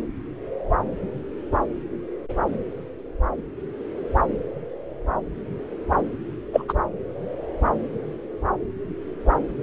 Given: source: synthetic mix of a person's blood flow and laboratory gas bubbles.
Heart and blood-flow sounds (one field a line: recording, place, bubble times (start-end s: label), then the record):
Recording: Doppler ultrasound of blood flow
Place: subclavian vein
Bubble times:
6.53-6.64 s: bubbles
6.68-6.73 s: bubbles
From the record:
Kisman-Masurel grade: 113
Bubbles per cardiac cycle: 1 to 2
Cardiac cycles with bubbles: 1 to 10%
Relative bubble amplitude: loud (0.450 to 0.775)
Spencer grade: 1 (occasional bubble signal discernible with the cardiac motion signal, with majority of cardiac periods free of bubbles)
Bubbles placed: anywhere in the cardiac cycle